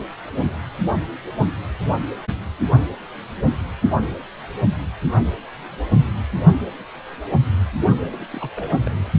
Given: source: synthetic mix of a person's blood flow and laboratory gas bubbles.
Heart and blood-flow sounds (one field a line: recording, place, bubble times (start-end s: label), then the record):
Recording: Doppler ultrasound of blood flow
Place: precordium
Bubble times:
8.08-8.26 s: bubbles
8.30-8.50 s: bubbles
8.56-9.11 s: bubbles
From the record:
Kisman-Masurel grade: 211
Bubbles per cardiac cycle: several, 3 to 8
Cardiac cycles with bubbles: 1 to 10%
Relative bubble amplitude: barely perceptible (0.100 to 0.250)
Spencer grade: 1 (occasional bubble signal discernible with the cardiac motion signal, with majority of cardiac periods free of bubbles)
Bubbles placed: only in the low amplitude regions of the cardiac cycle